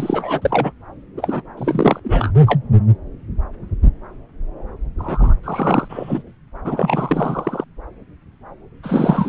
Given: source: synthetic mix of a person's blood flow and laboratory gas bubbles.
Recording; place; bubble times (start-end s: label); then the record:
Doppler ultrasound of blood flow; subclavian vein
0.00-0.72 s: bubbles
1.17-1.42 s: bubbles
1.57-2.00 s: bubbles
2.04-2.31 s: bubbles
2.46-2.60 s: bubbles
4.98-5.35 s: bubbles
5.43-6.22 s: bubbles
6.64-7.64 s: bubbles
8.83-9.29 s: bubbles
From the record:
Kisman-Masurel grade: 332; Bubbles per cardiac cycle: rolling drumbeat, 9 or more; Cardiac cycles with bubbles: 50 to 99%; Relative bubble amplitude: moderate (0.250 to 0.450); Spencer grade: 3 (all of the cardiac periods contain showers or single bubble signals, but not dominating or overriding the cardiac motion signals); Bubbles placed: anywhere in the cardiac cycle